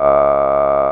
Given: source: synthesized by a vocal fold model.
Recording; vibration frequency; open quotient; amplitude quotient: sustained vowel; 70 Hz; 0.1; 1.3